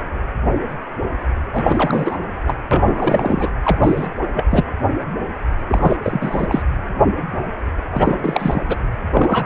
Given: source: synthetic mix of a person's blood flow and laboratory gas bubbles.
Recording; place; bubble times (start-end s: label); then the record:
Doppler ultrasound of blood flow; precordium
1.53-2.18 s: bubbles
2.46-2.54 s: bubbles
2.71-3.50 s: bubbles
3.63-3.78 s: bubbles
3.81-4.08 s: bubbles
4.21-4.29 s: bubbles
4.33-4.44 s: bubbles
4.50-4.65 s: bubbles
5.69-5.97 s: bubbles
6.03-6.62 s: bubbles
7.91-8.62 s: bubbles
8.68-8.76 s: bubbles
9.12-9.46 s: bubbles
From the record:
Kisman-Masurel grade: 333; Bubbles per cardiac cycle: rolling drumbeat, 9 or more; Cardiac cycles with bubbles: 50 to 99%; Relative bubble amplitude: loud (0.450 to 0.775); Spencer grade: 3 (all of the cardiac periods contain showers or single bubble signals, but not dominating or overriding the cardiac motion signals); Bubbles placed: anywhere in the cardiac cycle